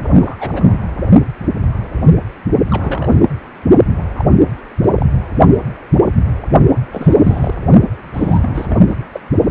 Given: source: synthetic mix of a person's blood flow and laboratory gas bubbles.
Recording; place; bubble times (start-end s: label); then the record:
Doppler ultrasound of blood flow; precordium
0.03-0.35 s: bubbles
0.39-0.86 s: bubbles
2.69-3.27 s: bubbles
3.96-4.03 s: bubbles
4.16-4.25 s: bubbles
4.78-5.06 s: bubbles
6.92-7.54 s: bubbles
8.13-8.77 s: bubbles
8.90-8.96 s: bubbles
9.12-9.20 s: bubbles
From the record:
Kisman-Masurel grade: 232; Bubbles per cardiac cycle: several, 3 to 8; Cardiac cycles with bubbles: 50 to 99%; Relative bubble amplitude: moderate (0.250 to 0.450); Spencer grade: 3 (all of the cardiac periods contain showers or single bubble signals, but not dominating or overriding the cardiac motion signals); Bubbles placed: only in the low amplitude regions of the cardiac cycle